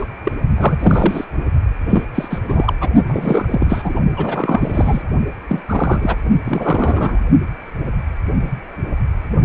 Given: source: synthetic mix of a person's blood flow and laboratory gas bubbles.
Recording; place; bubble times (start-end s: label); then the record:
Doppler ultrasound of blood flow; precordium
0.00-0.05 s: bubbles
0.24-0.32 s: bubbles
0.56-0.77 s: bubbles
0.79-1.25 s: bubbles
1.89-2.05 s: bubbles
2.15-2.41 s: bubbles
2.47-2.73 s: bubbles
2.80-2.90 s: bubbles
3.06-4.00 s: bubbles
4.16-5.08 s: bubbles
5.48-5.61 s: bubbles
5.69-6.17 s: bubbles
6.45-7.20 s: bubbles
From the record:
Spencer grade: 3 (all of the cardiac periods contain showers or single bubble signals, but not dominating or overriding the cardiac motion signals); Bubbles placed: only in the low amplitude regions of the cardiac cycle